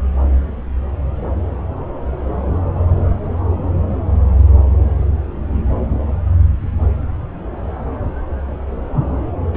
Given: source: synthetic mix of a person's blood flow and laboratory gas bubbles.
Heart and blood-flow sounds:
Doppler ultrasound of blood flow; subclavian vein
9.54-9.57 s: bubbles
From the record:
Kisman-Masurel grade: 111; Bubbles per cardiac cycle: 1 to 2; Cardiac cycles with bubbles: 1 to 10%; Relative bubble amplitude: barely perceptible (0.100 to 0.250); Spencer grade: 1 (occasional bubble signal discernible with the cardiac motion signal, with majority of cardiac periods free of bubbles); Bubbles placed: anywhere in the cardiac cycle

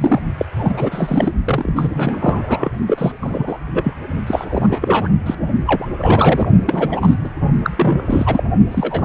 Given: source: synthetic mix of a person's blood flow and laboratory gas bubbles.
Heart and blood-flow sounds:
Doppler ultrasound of blood flow; precordium
0.00-0.22 s: bubbles
0.38-0.46 s: bubbles
0.56-1.33 s: bubbles
1.45-1.73 s: bubbles
1.75-2.75 s: bubbles
2.87-3.12 s: bubbles
3.21-3.59 s: bubbles
3.67-3.93 s: bubbles
4.27-5.09 s: bubbles
5.26-5.35 s: bubbles
5.66-5.86 s: bubbles
5.98-6.48 s: bubbles
6.66-7.15 s: bubbles
7.24-7.29 s: bubbles
7.63-7.70 s: bubbles
7.76-8.43 s: bubbles
8.71-9.05 s: bubbles
From the record:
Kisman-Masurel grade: 343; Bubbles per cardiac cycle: rolling drumbeat, 9 or more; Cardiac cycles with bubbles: 100%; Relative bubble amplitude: loud (0.450 to 0.775); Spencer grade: 3 (all of the cardiac periods contain showers or single bubble signals, but not dominating or overriding the cardiac motion signals); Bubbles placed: only in the low amplitude regions of the cardiac cycle

